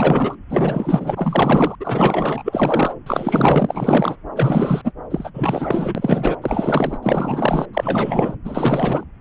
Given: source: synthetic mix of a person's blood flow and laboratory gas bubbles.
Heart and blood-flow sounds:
Doppler ultrasound of blood flow; subclavian vein
0.00-0.35 s: bubbles
0.49-1.76 s: bubbles
1.80-2.94 s: bubbles
3.06-4.17 s: bubbles
4.35-4.82 s: bubbles
4.84-4.92 s: bubbles
5.10-5.31 s: bubbles
5.33-6.37 s: bubbles
6.42-6.98 s: bubbles
7.03-7.66 s: bubbles
7.73-8.36 s: bubbles
8.45-9.04 s: bubbles
From the record:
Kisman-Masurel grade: 444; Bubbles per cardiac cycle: continuous sound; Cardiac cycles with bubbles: 100%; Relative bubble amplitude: maximal (0.775 to 0.999); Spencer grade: 4 (maximum detectable bubble signal sounding continuously throughout systole and diastole of every cardiac period, and overriding the amplitude of the normal cardiac signals); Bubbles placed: anywhere in the cardiac cycle

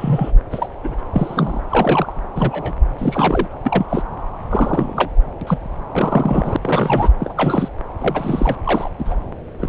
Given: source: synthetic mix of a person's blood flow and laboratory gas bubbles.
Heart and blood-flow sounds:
Doppler ultrasound of blood flow; subclavian vein
0.00-0.31 s: bubbles
0.51-0.68 s: bubbles
0.83-0.94 s: bubbles
1.13-1.61 s: bubbles
1.69-2.13 s: bubbles
2.35-2.72 s: bubbles
2.98-3.48 s: bubbles
3.63-3.85 s: bubbles
3.89-4.02 s: bubbles
4.50-5.10 s: bubbles
5.41-5.58 s: bubbles
5.92-6.56 s: bubbles
6.61-7.10 s: bubbles
7.19-7.68 s: bubbles
7.99-8.57 s: bubbles
8.64-8.89 s: bubbles
8.98-9.16 s: bubbles
9.60-9.69 s: bubbles
From the record:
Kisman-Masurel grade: 242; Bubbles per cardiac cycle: several, 3 to 8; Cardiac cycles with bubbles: 100%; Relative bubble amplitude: moderate (0.250 to 0.450); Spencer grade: 3 (all of the cardiac periods contain showers or single bubble signals, but not dominating or overriding the cardiac motion signals); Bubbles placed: anywhere in the cardiac cycle

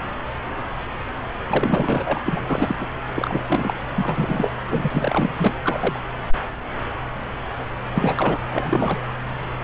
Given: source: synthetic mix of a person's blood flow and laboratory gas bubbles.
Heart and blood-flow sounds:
Doppler ultrasound of blood flow; subclavian vein
1.49-2.20 s: bubbles
2.25-2.75 s: bubbles
2.80-2.87 s: bubbles
3.15-3.44 s: bubbles
3.49-3.73 s: bubbles
3.95-4.50 s: bubbles
4.67-5.34 s: bubbles
5.38-5.54 s: bubbles
5.63-5.99 s: bubbles
7.95-8.38 s: bubbles
8.49-9.01 s: bubbles
From the record:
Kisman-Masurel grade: 332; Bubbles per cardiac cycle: rolling drumbeat, 9 or more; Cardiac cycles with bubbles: 50 to 99%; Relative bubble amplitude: moderate (0.250 to 0.450); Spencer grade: 3 (all of the cardiac periods contain showers or single bubble signals, but not dominating or overriding the cardiac motion signals); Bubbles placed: anywhere in the cardiac cycle

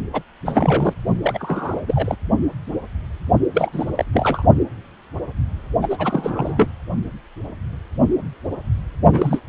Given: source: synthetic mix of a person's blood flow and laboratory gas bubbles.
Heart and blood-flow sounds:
Doppler ultrasound of blood flow; precordium
0.13-0.22 s: bubbles
0.45-0.94 s: bubbles
1.22-2.16 s: bubbles
3.54-3.90 s: bubbles
3.96-4.04 s: bubbles
4.13-4.42 s: bubbles
5.81-6.70 s: bubbles
9.12-9.39 s: bubbles
From the record:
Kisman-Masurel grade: 332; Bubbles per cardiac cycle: rolling drumbeat, 9 or more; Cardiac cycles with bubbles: 50 to 99%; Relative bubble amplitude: moderate (0.250 to 0.450); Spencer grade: 3 (all of the cardiac periods contain showers or single bubble signals, but not dominating or overriding the cardiac motion signals); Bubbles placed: only in the low amplitude regions of the cardiac cycle

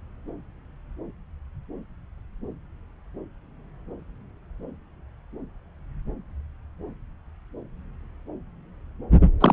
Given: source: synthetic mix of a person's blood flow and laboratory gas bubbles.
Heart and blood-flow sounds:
Doppler ultrasound of blood flow; subclavian vein
9.40-9.53 s: bubbles
From the record:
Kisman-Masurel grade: 213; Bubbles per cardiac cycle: several, 3 to 8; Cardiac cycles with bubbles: 1 to 10%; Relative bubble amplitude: loud (0.450 to 0.775); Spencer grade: 1 (occasional bubble signal discernible with the cardiac motion signal, with majority of cardiac periods free of bubbles); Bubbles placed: anywhere in the cardiac cycle

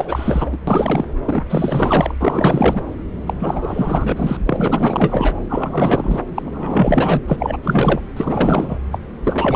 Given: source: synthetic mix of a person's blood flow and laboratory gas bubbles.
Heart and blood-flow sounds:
Doppler ultrasound of blood flow; subclavian vein
0.00-0.58 s: bubbles
0.67-1.04 s: bubbles
1.25-1.44 s: bubbles
1.50-2.15 s: bubbles
2.21-2.81 s: bubbles
3.26-3.33 s: bubbles
3.40-4.38 s: bubbles
4.46-5.37 s: bubbles
5.49-6.21 s: bubbles
6.35-7.24 s: bubbles
7.28-7.58 s: bubbles
7.63-8.01 s: bubbles
8.16-8.80 s: bubbles
8.92-8.98 s: bubbles
9.23-9.56 s: bubbles
From the record:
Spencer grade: 4 (maximum detectable bubble signal sounding continuously throughout systole and diastole of every cardiac period, and overriding the amplitude of the normal cardiac signals); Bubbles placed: anywhere in the cardiac cycle

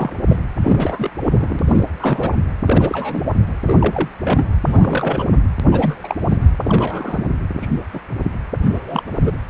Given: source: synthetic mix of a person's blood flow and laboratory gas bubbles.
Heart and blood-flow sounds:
Doppler ultrasound of blood flow; precordium
0.00-0.13 s: bubbles
0.28-0.40 s: bubbles
0.63-1.10 s: bubbles
1.22-1.59 s: bubbles
1.66-1.86 s: bubbles
2.00-2.35 s: bubbles
2.62-3.24 s: bubbles
3.65-4.08 s: bubbles
4.24-4.60 s: bubbles
4.67-5.29 s: bubbles
5.32-5.36 s: bubbles
5.71-5.95 s: bubbles
6.04-6.17 s: bubbles
6.29-6.38 s: bubbles
6.62-7.25 s: bubbles
7.61-7.67 s: bubbles
7.93-8.01 s: bubbles
8.23-8.31 s: bubbles
8.62-9.03 s: bubbles
9.22-9.32 s: bubbles
From the record:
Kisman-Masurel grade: 242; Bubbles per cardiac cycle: several, 3 to 8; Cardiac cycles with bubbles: 100%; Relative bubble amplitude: moderate (0.250 to 0.450); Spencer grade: 3 (all of the cardiac periods contain showers or single bubble signals, but not dominating or overriding the cardiac motion signals); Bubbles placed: anywhere in the cardiac cycle

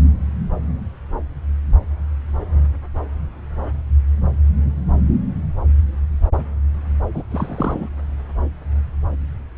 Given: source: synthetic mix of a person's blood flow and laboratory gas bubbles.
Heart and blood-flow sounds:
Doppler ultrasound of blood flow; subclavian vein
7.14-7.23 s: bubbles
7.30-7.90 s: bubbles
From the record:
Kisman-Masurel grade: 212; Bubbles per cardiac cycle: several, 3 to 8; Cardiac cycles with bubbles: 1 to 10%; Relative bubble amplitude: moderate (0.250 to 0.450); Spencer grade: 1 (occasional bubble signal discernible with the cardiac motion signal, with majority of cardiac periods free of bubbles); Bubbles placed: anywhere in the cardiac cycle

